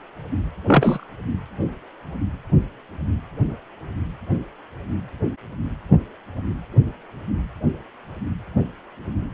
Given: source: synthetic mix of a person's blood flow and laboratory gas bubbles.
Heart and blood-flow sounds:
Doppler ultrasound of blood flow; precordium
0.67-1.04 s: bubbles
From the record:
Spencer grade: 2 (many but less than half of the cardiac periods contain bubble signals, singularly or in groups); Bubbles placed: anywhere in the cardiac cycle

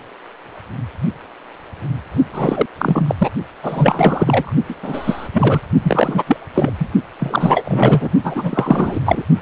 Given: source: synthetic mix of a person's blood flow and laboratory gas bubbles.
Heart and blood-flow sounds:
Doppler ultrasound of blood flow; precordium
2.32-2.66 s: bubbles
2.79-3.15 s: bubbles
3.18-3.30 s: bubbles
3.62-4.53 s: bubbles
4.69-4.75 s: bubbles
4.83-5.28 s: bubbles
5.33-5.62 s: bubbles
5.83-6.23 s: bubbles
6.27-6.37 s: bubbles
6.55-6.72 s: bubbles
6.79-6.88 s: bubbles
7.20-8.10 s: bubbles
8.23-8.99 s: bubbles
9.05-9.22 s: bubbles
From the record:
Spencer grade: 3 (all of the cardiac periods contain showers or single bubble signals, but not dominating or overriding the cardiac motion signals); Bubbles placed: only in the low amplitude regions of the cardiac cycle

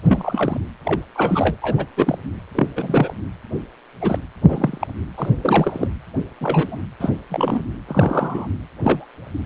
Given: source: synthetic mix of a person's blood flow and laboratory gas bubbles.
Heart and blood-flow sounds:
Doppler ultrasound of blood flow; precordium
0.06-0.60 s: bubbles
0.85-1.00 s: bubbles
1.15-1.56 s: bubbles
1.61-1.86 s: bubbles
1.97-2.18 s: bubbles
2.55-2.67 s: bubbles
2.75-3.14 s: bubbles
4.01-4.19 s: bubbles
4.48-4.87 s: bubbles
5.17-5.37 s: bubbles
5.42-5.88 s: bubbles
6.41-6.82 s: bubbles
7.00-7.10 s: bubbles
7.30-7.62 s: bubbles
7.88-8.48 s: bubbles
8.82-9.05 s: bubbles
From the record:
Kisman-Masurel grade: 242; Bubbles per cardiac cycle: several, 3 to 8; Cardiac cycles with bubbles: 100%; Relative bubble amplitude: moderate (0.250 to 0.450); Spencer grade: 3 (all of the cardiac periods contain showers or single bubble signals, but not dominating or overriding the cardiac motion signals); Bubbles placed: anywhere in the cardiac cycle

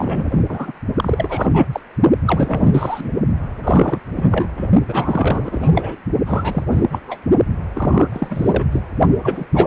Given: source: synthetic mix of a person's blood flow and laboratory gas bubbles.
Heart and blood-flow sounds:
Doppler ultrasound of blood flow; precordium
0.00-0.45 s: bubbles
0.48-0.72 s: bubbles
0.96-1.66 s: bubbles
1.72-1.81 s: bubbles
2.26-3.11 s: bubbles
3.64-3.99 s: bubbles
4.16-4.47 s: bubbles
4.56-4.67 s: bubbles
4.87-5.96 s: bubbles
6.26-6.63 s: bubbles
6.71-6.85 s: bubbles
6.91-6.99 s: bubbles
7.07-7.18 s: bubbles
7.73-8.07 s: bubbles
8.12-8.65 s: bubbles
8.71-8.80 s: bubbles
9.23-9.46 s: bubbles
9.54-9.67 s: bubbles
From the record:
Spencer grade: 3 (all of the cardiac periods contain showers or single bubble signals, but not dominating or overriding the cardiac motion signals); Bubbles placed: only in the low amplitude regions of the cardiac cycle

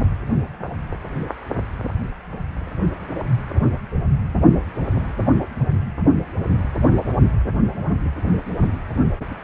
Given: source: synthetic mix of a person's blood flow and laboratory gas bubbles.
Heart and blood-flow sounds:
Doppler ultrasound of blood flow; precordium
no bubbles
From the record:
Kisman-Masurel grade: 000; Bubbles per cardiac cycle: 0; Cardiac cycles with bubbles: 0%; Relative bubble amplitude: no bubbles discernible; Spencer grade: 0 (complete lack of bubble signals)

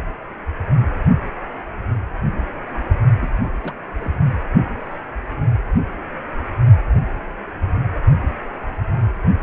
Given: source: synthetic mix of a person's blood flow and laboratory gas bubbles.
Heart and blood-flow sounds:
Doppler ultrasound of blood flow; precordium
3.21-3.31 s: bubbles
3.43-3.50 s: bubbles
3.58-3.72 s: bubbles
3.97-4.10 s: bubbles
From the record:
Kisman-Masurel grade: 211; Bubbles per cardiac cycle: several, 3 to 8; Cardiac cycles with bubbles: 1 to 10%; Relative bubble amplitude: barely perceptible (0.100 to 0.250); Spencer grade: 1 (occasional bubble signal discernible with the cardiac motion signal, with majority of cardiac periods free of bubbles); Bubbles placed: anywhere in the cardiac cycle

